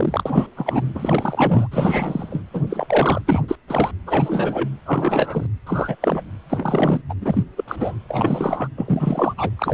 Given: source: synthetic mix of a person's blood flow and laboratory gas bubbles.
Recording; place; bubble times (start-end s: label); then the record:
Doppler ultrasound of blood flow; precordium
0.00-0.49 s: bubbles
0.56-0.88 s: bubbles
0.95-1.68 s: bubbles
1.71-2.40 s: bubbles
2.54-2.63 s: bubbles
2.70-3.21 s: bubbles
3.27-3.43 s: bubbles
3.48-3.56 s: bubbles
3.68-3.91 s: bubbles
4.07-4.69 s: bubbles
4.86-5.46 s: bubbles
5.67-5.96 s: bubbles
6.01-6.21 s: bubbles
6.50-7.01 s: bubbles
7.09-7.14 s: bubbles
7.21-7.43 s: bubbles
7.57-7.64 s: bubbles
7.67-7.96 s: bubbles
8.09-8.68 s: bubbles
8.77-9.34 s: bubbles
9.37-9.50 s: bubbles
9.57-9.74 s: bubbles
From the record:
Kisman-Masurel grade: 342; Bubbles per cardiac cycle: rolling drumbeat, 9 or more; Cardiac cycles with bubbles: 100%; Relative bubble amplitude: moderate (0.250 to 0.450); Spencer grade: 3 (all of the cardiac periods contain showers or single bubble signals, but not dominating or overriding the cardiac motion signals); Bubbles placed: anywhere in the cardiac cycle